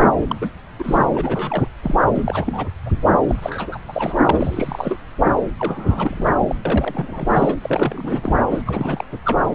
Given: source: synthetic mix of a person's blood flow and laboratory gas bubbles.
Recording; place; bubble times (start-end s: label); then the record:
Doppler ultrasound of blood flow; subclavian vein
0.00-0.04 s: bubbles
0.18-0.39 s: bubbles
0.41-0.50 s: bubbles
0.78-1.07 s: bubbles
1.15-1.69 s: bubbles
1.82-1.95 s: bubbles
2.15-2.68 s: bubbles
2.85-2.92 s: bubbles
3.27-3.36 s: bubbles
3.42-3.77 s: bubbles
3.88-4.14 s: bubbles
4.25-4.96 s: bubbles
5.58-6.31 s: bubbles
6.47-6.55 s: bubbles
6.65-7.54 s: bubbles
7.62-8.32 s: bubbles
8.50-9.04 s: bubbles
9.25-9.38 s: bubbles
From the record:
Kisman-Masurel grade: 342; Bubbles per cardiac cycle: rolling drumbeat, 9 or more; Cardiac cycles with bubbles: 100%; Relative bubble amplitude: moderate (0.250 to 0.450); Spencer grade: 3 (all of the cardiac periods contain showers or single bubble signals, but not dominating or overriding the cardiac motion signals); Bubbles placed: anywhere in the cardiac cycle